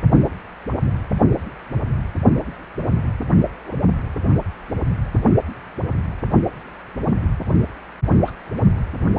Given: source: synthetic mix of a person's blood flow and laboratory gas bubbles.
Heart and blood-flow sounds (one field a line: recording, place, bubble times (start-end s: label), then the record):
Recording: Doppler ultrasound of blood flow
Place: precordium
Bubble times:
0.70-0.74 s: bubbles
3.66-3.77 s: bubbles
7.03-7.14 s: bubbles
8.24-8.33 s: bubbles
From the record:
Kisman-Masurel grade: 121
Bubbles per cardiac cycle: 1 to 2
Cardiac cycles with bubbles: 10 to 50%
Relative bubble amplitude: barely perceptible (0.100 to 0.250)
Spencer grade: 2 (many but less than half of the cardiac periods contain bubble signals, singularly or in groups)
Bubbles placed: only in the low amplitude regions of the cardiac cycle